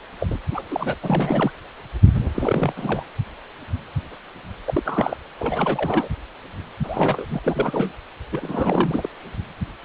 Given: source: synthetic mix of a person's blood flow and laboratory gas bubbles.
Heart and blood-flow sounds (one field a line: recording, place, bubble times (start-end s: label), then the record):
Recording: Doppler ultrasound of blood flow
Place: precordium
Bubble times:
0.20-0.40 s: bubbles
0.52-0.64 s: bubbles
0.69-0.94 s: bubbles
1.02-1.51 s: bubbles
2.35-2.74 s: bubbles
2.76-3.03 s: bubbles
4.67-4.83 s: bubbles
4.85-5.17 s: bubbles
5.39-6.08 s: bubbles
6.83-7.25 s: bubbles
7.30-7.92 s: bubbles
8.32-9.09 s: bubbles
From the record:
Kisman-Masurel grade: 332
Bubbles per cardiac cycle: rolling drumbeat, 9 or more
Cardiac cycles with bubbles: 50 to 99%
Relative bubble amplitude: moderate (0.250 to 0.450)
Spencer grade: 3 (all of the cardiac periods contain showers or single bubble signals, but not dominating or overriding the cardiac motion signals)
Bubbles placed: anywhere in the cardiac cycle